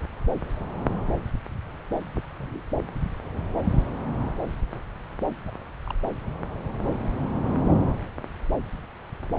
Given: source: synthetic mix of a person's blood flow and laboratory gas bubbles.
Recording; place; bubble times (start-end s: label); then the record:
Doppler ultrasound of blood flow; subclavian vein
2.16-2.21 s: bubbles
2.38-2.60 s: bubbles
5.47-5.50 s: bubbles
5.87-5.93 s: bubbles
From the record:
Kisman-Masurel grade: 121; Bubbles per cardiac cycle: 1 to 2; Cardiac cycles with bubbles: 10 to 50%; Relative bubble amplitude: barely perceptible (0.100 to 0.250); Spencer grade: 2 (many but less than half of the cardiac periods contain bubble signals, singularly or in groups); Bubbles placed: anywhere in the cardiac cycle